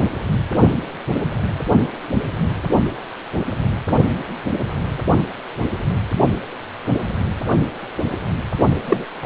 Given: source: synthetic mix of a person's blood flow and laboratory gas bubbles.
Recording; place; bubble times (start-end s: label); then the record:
Doppler ultrasound of blood flow; precordium
8.87-9.05 s: bubbles
9.22-9.26 s: bubbles
From the record:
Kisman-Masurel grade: 223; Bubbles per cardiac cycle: several, 3 to 8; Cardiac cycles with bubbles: 10 to 50%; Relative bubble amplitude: loud (0.450 to 0.775); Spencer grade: 2 (many but less than half of the cardiac periods contain bubble signals, singularly or in groups); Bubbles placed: only in the low amplitude regions of the cardiac cycle